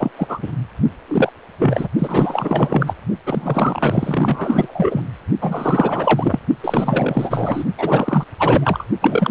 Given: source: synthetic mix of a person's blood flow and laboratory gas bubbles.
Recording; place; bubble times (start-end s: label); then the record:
Doppler ultrasound of blood flow; precordium
0.00-0.11 s: bubbles
0.16-0.39 s: bubbles
0.42-0.51 s: bubbles
1.07-1.32 s: bubbles
1.58-1.89 s: bubbles
1.99-2.95 s: bubbles
3.26-5.02 s: bubbles
5.41-6.39 s: bubbles
6.63-7.64 s: bubbles
7.78-8.25 s: bubbles
8.38-8.84 s: bubbles
9.01-9.31 s: bubbles
From the record:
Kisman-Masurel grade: 444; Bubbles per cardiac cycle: continuous sound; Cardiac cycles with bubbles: 100%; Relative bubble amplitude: maximal (0.775 to 0.999); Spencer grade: 4 (maximum detectable bubble signal sounding continuously throughout systole and diastole of every cardiac period, and overriding the amplitude of the normal cardiac signals); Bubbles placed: only in the low amplitude regions of the cardiac cycle